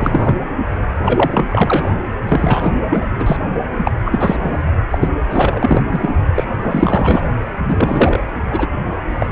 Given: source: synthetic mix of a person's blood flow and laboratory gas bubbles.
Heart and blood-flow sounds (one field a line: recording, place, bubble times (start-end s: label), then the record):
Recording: Doppler ultrasound of blood flow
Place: precordium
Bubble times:
0.00-0.36 s: bubbles
1.04-1.91 s: bubbles
2.29-2.71 s: bubbles
2.90-3.07 s: bubbles
3.19-3.37 s: bubbles
3.84-3.91 s: bubbles
4.04-4.63 s: bubbles
4.91-4.98 s: bubbles
5.01-5.09 s: bubbles
5.30-5.82 s: bubbles
5.92-6.11 s: bubbles
6.35-6.45 s: bubbles
6.62-7.24 s: bubbles
7.67-8.19 s: bubbles
8.50-8.68 s: bubbles
9.16-9.30 s: bubbles
From the record:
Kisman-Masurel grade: 343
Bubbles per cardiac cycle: rolling drumbeat, 9 or more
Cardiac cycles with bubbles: 100%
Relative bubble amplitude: loud (0.450 to 0.775)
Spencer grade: 3 (all of the cardiac periods contain showers or single bubble signals, but not dominating or overriding the cardiac motion signals)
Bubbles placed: anywhere in the cardiac cycle